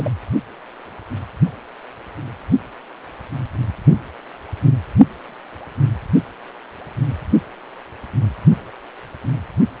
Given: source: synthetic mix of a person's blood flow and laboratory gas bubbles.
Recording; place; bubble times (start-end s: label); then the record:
Doppler ultrasound of blood flow; precordium
0.00-0.10 s: bubbles
From the record:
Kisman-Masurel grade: 223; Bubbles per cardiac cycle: several, 3 to 8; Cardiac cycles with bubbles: 10 to 50%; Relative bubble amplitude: loud (0.450 to 0.775); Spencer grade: 2 (many but less than half of the cardiac periods contain bubble signals, singularly or in groups); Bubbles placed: only in the low amplitude regions of the cardiac cycle